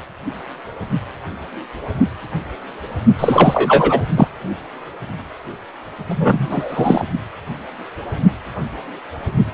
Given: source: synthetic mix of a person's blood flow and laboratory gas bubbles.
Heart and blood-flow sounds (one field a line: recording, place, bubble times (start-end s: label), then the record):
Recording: Doppler ultrasound of blood flow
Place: precordium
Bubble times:
3.19-4.03 s: bubbles
4.15-4.28 s: bubbles
6.09-7.06 s: bubbles
From the record:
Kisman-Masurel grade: 223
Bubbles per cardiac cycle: several, 3 to 8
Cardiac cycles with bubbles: 10 to 50%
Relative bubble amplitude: loud (0.450 to 0.775)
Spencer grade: 2 (many but less than half of the cardiac periods contain bubble signals, singularly or in groups)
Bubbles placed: only in the low amplitude regions of the cardiac cycle